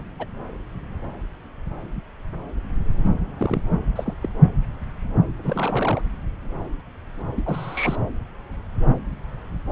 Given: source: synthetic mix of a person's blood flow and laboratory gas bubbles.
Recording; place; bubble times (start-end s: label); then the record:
Doppler ultrasound of blood flow; subclavian vein
0.00-0.04 s: bubbles
0.19-0.26 s: bubbles
2.98-3.09 s: bubbles
3.38-3.62 s: bubbles
3.96-4.16 s: bubbles
4.21-4.29 s: bubbles
5.35-6.02 s: bubbles
7.36-7.96 s: bubbles
From the record:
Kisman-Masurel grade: 221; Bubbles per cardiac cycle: several, 3 to 8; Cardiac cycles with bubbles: 10 to 50%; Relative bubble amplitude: barely perceptible (0.100 to 0.250); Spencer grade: 2 (many but less than half of the cardiac periods contain bubble signals, singularly or in groups); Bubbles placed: anywhere in the cardiac cycle